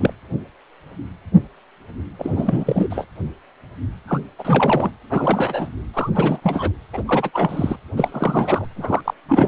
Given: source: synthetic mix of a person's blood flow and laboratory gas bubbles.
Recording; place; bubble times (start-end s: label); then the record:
Doppler ultrasound of blood flow; precordium
0.00-0.13 s: bubbles
2.19-3.05 s: bubbles
4.07-4.20 s: bubbles
4.38-4.91 s: bubbles
5.09-5.67 s: bubbles
5.93-6.09 s: bubbles
6.13-6.71 s: bubbles
6.93-7.03 s: bubbles
7.05-7.30 s: bubbles
7.33-7.76 s: bubbles
7.96-8.65 s: bubbles
8.75-9.01 s: bubbles
9.04-9.13 s: bubbles
9.29-9.48 s: bubbles
From the record:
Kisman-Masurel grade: 332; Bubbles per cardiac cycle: rolling drumbeat, 9 or more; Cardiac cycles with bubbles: 50 to 99%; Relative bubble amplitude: moderate (0.250 to 0.450); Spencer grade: 3 (all of the cardiac periods contain showers or single bubble signals, but not dominating or overriding the cardiac motion signals); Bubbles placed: anywhere in the cardiac cycle